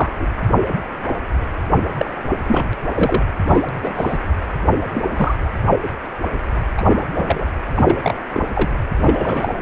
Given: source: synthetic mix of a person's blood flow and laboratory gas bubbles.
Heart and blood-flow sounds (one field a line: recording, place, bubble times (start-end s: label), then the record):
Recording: Doppler ultrasound of blood flow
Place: precordium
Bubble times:
0.00-0.10 s: bubbles
0.20-0.27 s: bubbles
1.97-2.11 s: bubbles
2.47-2.70 s: bubbles
2.94-3.24 s: bubbles
3.46-3.60 s: bubbles
3.68-3.74 s: bubbles
3.81-4.18 s: bubbles
4.94-5.02 s: bubbles
5.15-5.35 s: bubbles
6.77-6.84 s: bubbles
6.96-7.05 s: bubbles
7.16-7.47 s: bubbles
7.74-8.27 s: bubbles
8.32-8.48 s: bubbles
8.54-8.74 s: bubbles
9.01-9.53 s: bubbles
From the record:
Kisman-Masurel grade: 232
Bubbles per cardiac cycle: several, 3 to 8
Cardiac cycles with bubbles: 50 to 99%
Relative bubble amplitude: moderate (0.250 to 0.450)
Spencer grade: 3 (all of the cardiac periods contain showers or single bubble signals, but not dominating or overriding the cardiac motion signals)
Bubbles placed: anywhere in the cardiac cycle